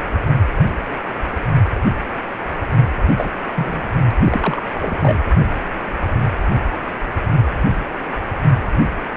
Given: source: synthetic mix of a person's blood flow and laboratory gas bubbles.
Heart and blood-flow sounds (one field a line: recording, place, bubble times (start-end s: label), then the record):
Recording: Doppler ultrasound of blood flow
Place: precordium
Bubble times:
3.17-3.30 s: bubbles
3.55-3.89 s: bubbles
4.24-4.62 s: bubbles
4.79-5.19 s: bubbles
From the record:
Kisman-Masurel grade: 222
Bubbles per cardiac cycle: several, 3 to 8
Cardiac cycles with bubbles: 10 to 50%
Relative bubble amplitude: moderate (0.250 to 0.450)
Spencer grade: 2 (many but less than half of the cardiac periods contain bubble signals, singularly or in groups)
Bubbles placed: only in the low amplitude regions of the cardiac cycle